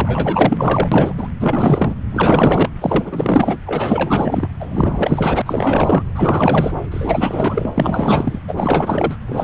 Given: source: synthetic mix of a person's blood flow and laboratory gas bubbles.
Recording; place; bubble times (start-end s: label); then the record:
Doppler ultrasound of blood flow; subclavian vein
0.00-0.88 s: bubbles
0.92-1.13 s: bubbles
1.17-1.28 s: bubbles
1.40-1.95 s: bubbles
2.11-2.69 s: bubbles
2.81-3.58 s: bubbles
3.66-4.48 s: bubbles
4.60-5.42 s: bubbles
5.46-6.04 s: bubbles
6.15-6.71 s: bubbles
6.90-7.71 s: bubbles
7.74-8.39 s: bubbles
8.47-9.16 s: bubbles
9.28-9.44 s: bubbles
From the record:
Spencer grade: 4 (maximum detectable bubble signal sounding continuously throughout systole and diastole of every cardiac period, and overriding the amplitude of the normal cardiac signals); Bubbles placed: anywhere in the cardiac cycle